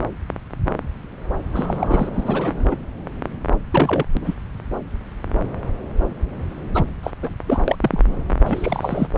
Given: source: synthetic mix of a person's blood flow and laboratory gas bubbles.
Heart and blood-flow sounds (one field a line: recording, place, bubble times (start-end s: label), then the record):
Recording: Doppler ultrasound of blood flow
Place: subclavian vein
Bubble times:
1.53-2.10 s: bubbles
2.14-2.65 s: bubbles
2.71-2.77 s: bubbles
3.71-4.05 s: bubbles
4.14-4.34 s: bubbles
6.74-6.84 s: bubbles
7.03-7.10 s: bubbles
7.21-7.34 s: bubbles
7.46-7.63 s: bubbles
7.67-7.76 s: bubbles
7.80-8.02 s: bubbles
8.46-9.08 s: bubbles
From the record:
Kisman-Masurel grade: 222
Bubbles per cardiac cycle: several, 3 to 8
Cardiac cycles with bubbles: 10 to 50%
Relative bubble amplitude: moderate (0.250 to 0.450)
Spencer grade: 2 (many but less than half of the cardiac periods contain bubble signals, singularly or in groups)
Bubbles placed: anywhere in the cardiac cycle